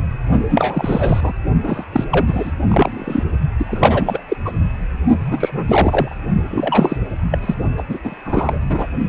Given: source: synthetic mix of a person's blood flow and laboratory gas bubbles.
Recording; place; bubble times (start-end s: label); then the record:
Doppler ultrasound of blood flow; precordium
0.49-1.33 s: bubbles
1.63-1.85 s: bubbles
1.92-2.04 s: bubbles
2.10-2.52 s: bubbles
2.68-3.23 s: bubbles
3.59-4.21 s: bubbles
4.28-4.36 s: bubbles
4.45-4.52 s: bubbles
5.31-6.15 s: bubbles
6.50-6.97 s: bubbles
7.30-7.38 s: bubbles
7.41-7.55 s: bubbles
7.77-7.83 s: bubbles
7.89-7.99 s: bubbles
8.03-8.15 s: bubbles
8.25-8.59 s: bubbles
8.69-8.86 s: bubbles
From the record:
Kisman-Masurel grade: 333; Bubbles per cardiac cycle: rolling drumbeat, 9 or more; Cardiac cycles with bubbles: 50 to 99%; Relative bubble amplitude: loud (0.450 to 0.775); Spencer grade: 3 (all of the cardiac periods contain showers or single bubble signals, but not dominating or overriding the cardiac motion signals); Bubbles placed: only in the low amplitude regions of the cardiac cycle